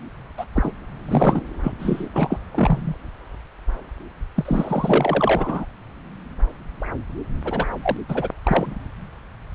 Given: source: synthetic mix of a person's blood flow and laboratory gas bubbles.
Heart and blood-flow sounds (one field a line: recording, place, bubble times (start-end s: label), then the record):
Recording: Doppler ultrasound of blood flow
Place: subclavian vein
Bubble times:
0.38-0.44 s: bubbles
0.56-0.72 s: bubbles
1.06-1.42 s: bubbles
1.63-1.72 s: bubbles
1.79-2.08 s: bubbles
2.15-2.38 s: bubbles
2.54-2.96 s: bubbles
4.36-5.66 s: bubbles
7.45-7.66 s: bubbles
7.83-7.97 s: bubbles
8.09-8.29 s: bubbles
8.43-8.71 s: bubbles
From the record:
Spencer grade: 3 (all of the cardiac periods contain showers or single bubble signals, but not dominating or overriding the cardiac motion signals)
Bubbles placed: anywhere in the cardiac cycle